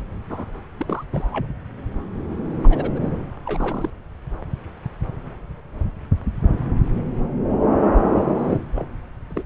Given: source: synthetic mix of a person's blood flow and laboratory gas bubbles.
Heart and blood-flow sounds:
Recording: Doppler ultrasound of blood flow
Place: subclavian vein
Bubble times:
0.00-0.02 s: bubbles
0.29-0.51 s: bubbles
0.77-1.04 s: bubbles
1.11-1.47 s: bubbles
2.62-2.91 s: bubbles
2.94-3.06 s: bubbles
3.45-3.90 s: bubbles
8.38-8.58 s: bubbles
8.75-8.84 s: bubbles
9.29-9.43 s: bubbles
From the record:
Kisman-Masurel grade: 221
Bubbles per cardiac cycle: several, 3 to 8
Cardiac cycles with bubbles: 10 to 50%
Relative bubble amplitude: barely perceptible (0.100 to 0.250)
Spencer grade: 2 (many but less than half of the cardiac periods contain bubble signals, singularly or in groups)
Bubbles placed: anywhere in the cardiac cycle

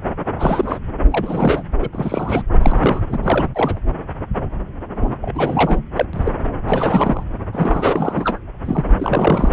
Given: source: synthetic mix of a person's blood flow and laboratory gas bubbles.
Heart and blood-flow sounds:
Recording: Doppler ultrasound of blood flow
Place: subclavian vein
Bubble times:
0.38-0.78 s: bubbles
1.11-1.62 s: bubbles
1.80-1.89 s: bubbles
1.93-2.44 s: bubbles
2.58-3.00 s: bubbles
3.08-3.18 s: bubbles
3.22-3.49 s: bubbles
3.54-3.79 s: bubbles
4.95-5.16 s: bubbles
5.21-5.80 s: bubbles
5.96-6.05 s: bubbles
6.13-6.31 s: bubbles
6.67-7.23 s: bubbles
7.52-8.38 s: bubbles
8.65-8.90 s: bubbles
8.96-9.53 s: bubbles
From the record:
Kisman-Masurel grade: 332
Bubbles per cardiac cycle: rolling drumbeat, 9 or more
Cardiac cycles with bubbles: 50 to 99%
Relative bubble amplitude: moderate (0.250 to 0.450)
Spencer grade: 3 (all of the cardiac periods contain showers or single bubble signals, but not dominating or overriding the cardiac motion signals)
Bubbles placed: anywhere in the cardiac cycle

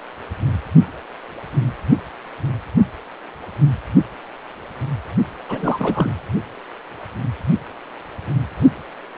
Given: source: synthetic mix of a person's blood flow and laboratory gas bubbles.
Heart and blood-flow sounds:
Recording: Doppler ultrasound of blood flow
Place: precordium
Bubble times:
5.49-6.12 s: bubbles
From the record:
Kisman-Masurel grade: 212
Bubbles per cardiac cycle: several, 3 to 8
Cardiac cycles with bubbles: 1 to 10%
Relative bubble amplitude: moderate (0.250 to 0.450)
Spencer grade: 1 (occasional bubble signal discernible with the cardiac motion signal, with majority of cardiac periods free of bubbles)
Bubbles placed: only in the low amplitude regions of the cardiac cycle

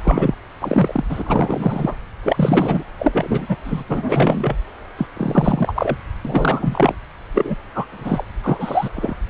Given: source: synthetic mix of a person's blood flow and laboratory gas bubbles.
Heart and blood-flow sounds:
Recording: Doppler ultrasound of blood flow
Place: subclavian vein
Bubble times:
0.04-0.36 s: bubbles
0.60-1.05 s: bubbles
1.09-1.94 s: bubbles
2.23-2.83 s: bubbles
2.98-3.57 s: bubbles
3.65-3.84 s: bubbles
3.89-4.56 s: bubbles
4.97-5.06 s: bubbles
5.16-5.96 s: bubbles
6.24-6.95 s: bubbles
7.33-7.56 s: bubbles
7.74-7.85 s: bubbles
7.92-8.24 s: bubbles
8.44-8.89 s: bubbles
8.95-9.15 s: bubbles
From the record:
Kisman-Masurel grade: 343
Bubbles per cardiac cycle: rolling drumbeat, 9 or more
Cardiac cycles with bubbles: 100%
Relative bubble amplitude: loud (0.450 to 0.775)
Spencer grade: 3 (all of the cardiac periods contain showers or single bubble signals, but not dominating or overriding the cardiac motion signals)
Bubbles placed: anywhere in the cardiac cycle

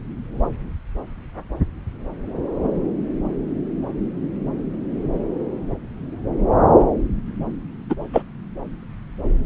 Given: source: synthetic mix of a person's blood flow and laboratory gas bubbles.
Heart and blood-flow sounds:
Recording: Doppler ultrasound of blood flow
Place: subclavian vein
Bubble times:
7.90-7.94 s: bubbles
8.13-8.22 s: bubbles
From the record:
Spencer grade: 1 (occasional bubble signal discernible with the cardiac motion signal, with majority of cardiac periods free of bubbles)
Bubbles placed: anywhere in the cardiac cycle

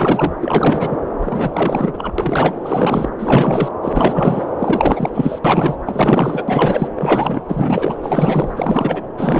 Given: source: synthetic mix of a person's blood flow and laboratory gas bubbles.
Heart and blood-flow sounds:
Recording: Doppler ultrasound of blood flow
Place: subclavian vein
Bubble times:
0.00-0.33 s: bubbles
0.41-0.98 s: bubbles
1.20-2.13 s: bubbles
2.18-2.56 s: bubbles
2.62-3.09 s: bubbles
3.19-3.71 s: bubbles
3.82-4.46 s: bubbles
4.58-5.09 s: bubbles
5.13-5.39 s: bubbles
5.45-5.77 s: bubbles
5.86-6.44 s: bubbles
6.48-6.92 s: bubbles
6.96-7.42 s: bubbles
7.48-7.97 s: bubbles
8.03-8.53 s: bubbles
8.56-9.01 s: bubbles
9.17-9.40 s: bubbles
From the record:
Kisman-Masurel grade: 444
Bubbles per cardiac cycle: continuous sound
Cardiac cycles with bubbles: 100%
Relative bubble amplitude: maximal (0.775 to 0.999)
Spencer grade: 4 (maximum detectable bubble signal sounding continuously throughout systole and diastole of every cardiac period, and overriding the amplitude of the normal cardiac signals)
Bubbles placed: anywhere in the cardiac cycle

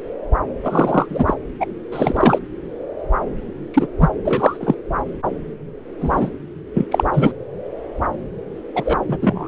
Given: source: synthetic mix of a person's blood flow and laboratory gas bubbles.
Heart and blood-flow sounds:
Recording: Doppler ultrasound of blood flow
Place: subclavian vein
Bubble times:
0.64-1.06 s: bubbles
1.09-1.34 s: bubbles
1.60-1.66 s: bubbles
1.91-2.39 s: bubbles
3.74-3.87 s: bubbles
4.00-4.09 s: bubbles
4.25-4.57 s: bubbles
4.60-4.75 s: bubbles
6.00-6.30 s: bubbles
6.74-6.85 s: bubbles
6.92-7.04 s: bubbles
7.13-7.31 s: bubbles
8.75-8.97 s: bubbles
9.09-9.17 s: bubbles
9.21-9.48 s: bubbles
From the record:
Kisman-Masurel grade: 233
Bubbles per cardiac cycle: several, 3 to 8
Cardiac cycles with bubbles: 50 to 99%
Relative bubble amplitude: loud (0.450 to 0.775)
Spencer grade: 3 (all of the cardiac periods contain showers or single bubble signals, but not dominating or overriding the cardiac motion signals)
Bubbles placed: anywhere in the cardiac cycle

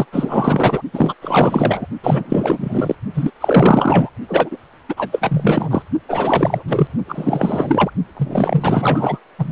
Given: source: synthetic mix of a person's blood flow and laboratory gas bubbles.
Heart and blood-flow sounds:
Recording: Doppler ultrasound of blood flow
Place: precordium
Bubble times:
0.00-0.05 s: bubbles
0.12-0.81 s: bubbles
0.93-1.15 s: bubbles
1.22-1.87 s: bubbles
2.03-2.95 s: bubbles
3.14-3.31 s: bubbles
3.41-4.10 s: bubbles
4.28-4.57 s: bubbles
4.89-5.09 s: bubbles
5.12-5.82 s: bubbles
6.08-6.63 s: bubbles
6.67-6.88 s: bubbles
7.05-7.91 s: bubbles
8.17-9.19 s: bubbles
9.38-9.52 s: bubbles
From the record:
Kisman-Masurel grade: 444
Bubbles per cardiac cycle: continuous sound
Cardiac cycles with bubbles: 100%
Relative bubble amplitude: maximal (0.775 to 0.999)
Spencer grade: 4 (maximum detectable bubble signal sounding continuously throughout systole and diastole of every cardiac period, and overriding the amplitude of the normal cardiac signals)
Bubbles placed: only in the low amplitude regions of the cardiac cycle

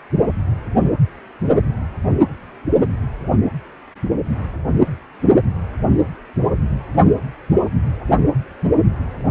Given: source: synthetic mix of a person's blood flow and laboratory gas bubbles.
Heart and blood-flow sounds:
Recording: Doppler ultrasound of blood flow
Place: precordium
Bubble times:
no bubbles
From the record:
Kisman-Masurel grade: 000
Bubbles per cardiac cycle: 0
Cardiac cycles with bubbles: 0%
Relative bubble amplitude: no bubbles discernible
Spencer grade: 0 (complete lack of bubble signals)

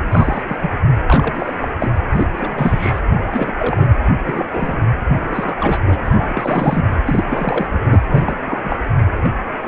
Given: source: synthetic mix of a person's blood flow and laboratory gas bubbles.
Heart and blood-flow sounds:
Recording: Doppler ultrasound of blood flow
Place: precordium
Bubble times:
0.12-0.43 s: bubbles
0.47-0.56 s: bubbles
0.62-0.70 s: bubbles
1.06-1.57 s: bubbles
1.61-1.70 s: bubbles
1.79-1.92 s: bubbles
2.11-2.27 s: bubbles
2.33-3.01 s: bubbles
3.12-3.52 s: bubbles
3.59-3.88 s: bubbles
4.25-4.76 s: bubbles
5.16-5.55 s: bubbles
5.59-5.79 s: bubbles
5.86-5.99 s: bubbles
6.04-6.88 s: bubbles
7.05-7.25 s: bubbles
7.29-7.67 s: bubbles
7.73-7.82 s: bubbles
7.90-8.03 s: bubbles
8.08-8.35 s: bubbles
8.46-8.62 s: bubbles
8.66-8.79 s: bubbles
9.24-9.29 s: bubbles
9.65-9.68 s: bubbles
From the record:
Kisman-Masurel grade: 342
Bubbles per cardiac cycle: rolling drumbeat, 9 or more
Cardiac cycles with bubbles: 100%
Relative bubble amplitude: moderate (0.250 to 0.450)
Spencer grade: 3 (all of the cardiac periods contain showers or single bubble signals, but not dominating or overriding the cardiac motion signals)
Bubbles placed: anywhere in the cardiac cycle

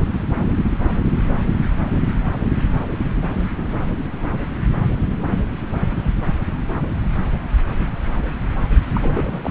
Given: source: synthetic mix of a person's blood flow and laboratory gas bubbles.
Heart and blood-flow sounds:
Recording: Doppler ultrasound of blood flow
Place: subclavian vein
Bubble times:
8.93-9.51 s: bubbles
From the record:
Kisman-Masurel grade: 221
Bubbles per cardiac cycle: several, 3 to 8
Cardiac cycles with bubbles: 10 to 50%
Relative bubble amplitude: barely perceptible (0.100 to 0.250)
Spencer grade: 2 (many but less than half of the cardiac periods contain bubble signals, singularly or in groups)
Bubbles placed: anywhere in the cardiac cycle

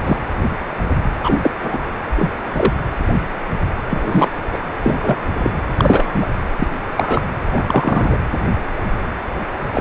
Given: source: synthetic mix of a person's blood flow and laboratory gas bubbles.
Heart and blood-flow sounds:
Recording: Doppler ultrasound of blood flow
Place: precordium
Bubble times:
0.03-0.17 s: bubbles
1.19-1.52 s: bubbles
1.60-1.80 s: bubbles
2.16-2.32 s: bubbles
2.53-2.73 s: bubbles
3.89-4.29 s: bubbles
4.52-4.59 s: bubbles
4.83-4.96 s: bubbles
5.01-5.18 s: bubbles
5.38-5.51 s: bubbles
5.76-6.26 s: bubbles
6.56-6.67 s: bubbles
6.96-7.21 s: bubbles
7.51-8.18 s: bubbles
9.74-9.81 s: bubbles
From the record:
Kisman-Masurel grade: 233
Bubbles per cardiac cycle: several, 3 to 8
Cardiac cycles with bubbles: 50 to 99%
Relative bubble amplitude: loud (0.450 to 0.775)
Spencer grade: 3 (all of the cardiac periods contain showers or single bubble signals, but not dominating or overriding the cardiac motion signals)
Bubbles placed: anywhere in the cardiac cycle

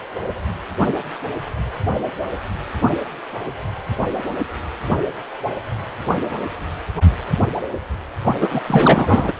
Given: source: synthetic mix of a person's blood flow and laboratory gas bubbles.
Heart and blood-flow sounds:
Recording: Doppler ultrasound of blood flow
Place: precordium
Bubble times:
8.41-8.61 s: bubbles
8.67-9.33 s: bubbles
From the record:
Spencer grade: 1 (occasional bubble signal discernible with the cardiac motion signal, with majority of cardiac periods free of bubbles)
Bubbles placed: only in the low amplitude regions of the cardiac cycle

